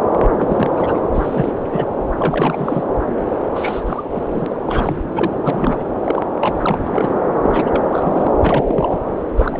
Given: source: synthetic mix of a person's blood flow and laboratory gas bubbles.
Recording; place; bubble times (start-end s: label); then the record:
Doppler ultrasound of blood flow; subclavian vein
0.12-0.28 s: bubbles
0.38-1.00 s: bubbles
1.13-1.52 s: bubbles
1.73-1.85 s: bubbles
2.19-2.83 s: bubbles
3.54-4.03 s: bubbles
4.11-5.01 s: bubbles
5.13-5.31 s: bubbles
5.42-5.84 s: bubbles
6.04-6.22 s: bubbles
6.41-7.12 s: bubbles
7.36-8.31 s: bubbles
8.42-8.97 s: bubbles
9.37-9.60 s: bubbles
From the record:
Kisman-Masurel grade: 342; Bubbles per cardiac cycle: rolling drumbeat, 9 or more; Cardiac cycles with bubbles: 100%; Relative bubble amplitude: moderate (0.250 to 0.450); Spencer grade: 3 (all of the cardiac periods contain showers or single bubble signals, but not dominating or overriding the cardiac motion signals); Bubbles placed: anywhere in the cardiac cycle